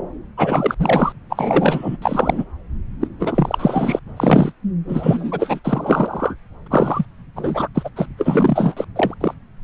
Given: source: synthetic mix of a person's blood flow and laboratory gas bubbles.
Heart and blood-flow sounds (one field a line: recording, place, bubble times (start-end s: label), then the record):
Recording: Doppler ultrasound of blood flow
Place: subclavian vein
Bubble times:
0.37-0.75 s: bubbles
0.78-1.12 s: bubbles
1.30-1.97 s: bubbles
2.01-2.45 s: bubbles
3.00-3.07 s: bubbles
3.19-3.99 s: bubbles
4.16-4.52 s: bubbles
4.89-5.60 s: bubbles
5.64-6.37 s: bubbles
6.66-7.06 s: bubbles
7.35-7.68 s: bubbles
7.75-7.89 s: bubbles
7.96-8.05 s: bubbles
8.18-8.85 s: bubbles
8.96-9.14 s: bubbles
9.21-9.34 s: bubbles
From the record:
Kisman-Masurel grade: 444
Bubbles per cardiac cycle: continuous sound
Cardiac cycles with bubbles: 100%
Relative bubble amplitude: maximal (0.775 to 0.999)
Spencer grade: 4 (maximum detectable bubble signal sounding continuously throughout systole and diastole of every cardiac period, and overriding the amplitude of the normal cardiac signals)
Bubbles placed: anywhere in the cardiac cycle